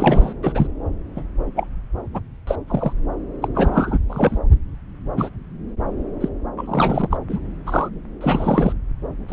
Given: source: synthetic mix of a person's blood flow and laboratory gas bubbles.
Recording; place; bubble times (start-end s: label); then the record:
Doppler ultrasound of blood flow; subclavian vein
0.00-0.33 s: bubbles
0.43-0.67 s: bubbles
1.16-1.23 s: bubbles
1.56-1.67 s: bubbles
2.14-2.20 s: bubbles
2.47-2.56 s: bubbles
2.68-2.93 s: bubbles
3.42-3.48 s: bubbles
3.54-3.99 s: bubbles
4.09-4.38 s: bubbles
5.17-5.29 s: bubbles
6.20-6.28 s: bubbles
6.57-7.17 s: bubbles
7.29-7.38 s: bubbles
7.66-7.89 s: bubbles
8.21-8.73 s: bubbles
9.28-9.33 s: bubbles
From the record:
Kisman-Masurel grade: 242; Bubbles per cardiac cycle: several, 3 to 8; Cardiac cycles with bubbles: 100%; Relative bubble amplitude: moderate (0.250 to 0.450); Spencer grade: 3 (all of the cardiac periods contain showers or single bubble signals, but not dominating or overriding the cardiac motion signals); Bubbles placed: anywhere in the cardiac cycle